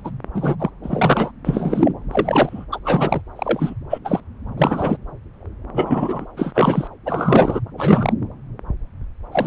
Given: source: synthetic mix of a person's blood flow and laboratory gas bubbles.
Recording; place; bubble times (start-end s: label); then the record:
Doppler ultrasound of blood flow; subclavian vein
0.04-0.11 s: bubbles
0.35-0.56 s: bubbles
0.59-0.70 s: bubbles
0.83-1.31 s: bubbles
1.45-1.92 s: bubbles
2.11-2.66 s: bubbles
2.72-2.79 s: bubbles
2.84-3.21 s: bubbles
3.35-3.75 s: bubbles
3.90-3.99 s: bubbles
4.04-4.20 s: bubbles
4.57-4.97 s: bubbles
5.74-6.25 s: bubbles
6.37-6.88 s: bubbles
7.05-7.60 s: bubbles
7.77-8.13 s: bubbles
9.32-9.46 s: bubbles
From the record:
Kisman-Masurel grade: 233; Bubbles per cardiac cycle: several, 3 to 8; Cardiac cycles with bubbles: 50 to 99%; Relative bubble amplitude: loud (0.450 to 0.775); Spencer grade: 3 (all of the cardiac periods contain showers or single bubble signals, but not dominating or overriding the cardiac motion signals); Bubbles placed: anywhere in the cardiac cycle